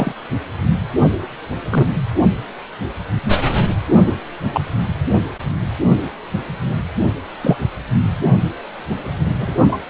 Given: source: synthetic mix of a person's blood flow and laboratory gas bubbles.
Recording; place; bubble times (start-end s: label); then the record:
Doppler ultrasound of blood flow; precordium
0.00-0.12 s: bubbles
1.71-1.87 s: bubbles
4.06-4.13 s: bubbles
4.52-4.66 s: bubbles
7.42-7.57 s: bubbles
9.39-9.55 s: bubbles
9.63-9.79 s: bubbles
From the record:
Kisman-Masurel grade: 122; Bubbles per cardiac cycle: 1 to 2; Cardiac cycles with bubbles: 10 to 50%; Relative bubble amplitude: moderate (0.250 to 0.450); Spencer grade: 2 (many but less than half of the cardiac periods contain bubble signals, singularly or in groups); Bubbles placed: anywhere in the cardiac cycle